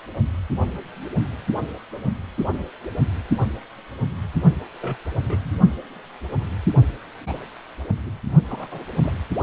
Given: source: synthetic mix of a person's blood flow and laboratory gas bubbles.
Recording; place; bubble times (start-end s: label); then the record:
Doppler ultrasound of blood flow; precordium
4.81-4.96 s: bubbles
5.12-5.52 s: bubbles
7.26-7.44 s: bubbles
8.06-8.11 s: bubbles
8.49-8.85 s: bubbles
9.03-9.13 s: bubbles
From the record:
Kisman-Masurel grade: 121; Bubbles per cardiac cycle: 1 to 2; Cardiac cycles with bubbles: 10 to 50%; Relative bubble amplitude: barely perceptible (0.100 to 0.250); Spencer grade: 2 (many but less than half of the cardiac periods contain bubble signals, singularly or in groups); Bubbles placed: only in the low amplitude regions of the cardiac cycle